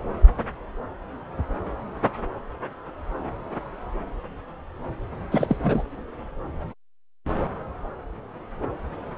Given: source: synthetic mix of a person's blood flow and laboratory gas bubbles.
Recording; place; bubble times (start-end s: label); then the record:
Doppler ultrasound of blood flow; subclavian vein
5.31-5.57 s: bubbles
5.62-5.83 s: bubbles
From the record:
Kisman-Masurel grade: 212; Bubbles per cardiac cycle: several, 3 to 8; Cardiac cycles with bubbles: 1 to 10%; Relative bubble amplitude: moderate (0.250 to 0.450); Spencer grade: 1 (occasional bubble signal discernible with the cardiac motion signal, with majority of cardiac periods free of bubbles); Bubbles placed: anywhere in the cardiac cycle